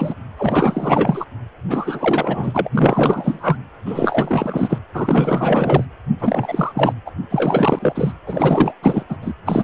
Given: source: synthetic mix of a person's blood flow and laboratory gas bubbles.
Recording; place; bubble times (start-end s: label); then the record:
Doppler ultrasound of blood flow; precordium
0.00-0.14 s: bubbles
0.38-1.24 s: bubbles
1.68-2.69 s: bubbles
2.76-3.57 s: bubbles
3.86-4.79 s: bubbles
4.94-5.85 s: bubbles
6.19-6.94 s: bubbles
7.06-7.11 s: bubbles
7.29-8.13 s: bubbles
8.27-8.74 s: bubbles
8.83-9.03 s: bubbles
9.09-9.17 s: bubbles
9.21-9.33 s: bubbles
9.45-9.64 s: bubbles
From the record:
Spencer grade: 4 (maximum detectable bubble signal sounding continuously throughout systole and diastole of every cardiac period, and overriding the amplitude of the normal cardiac signals); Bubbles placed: anywhere in the cardiac cycle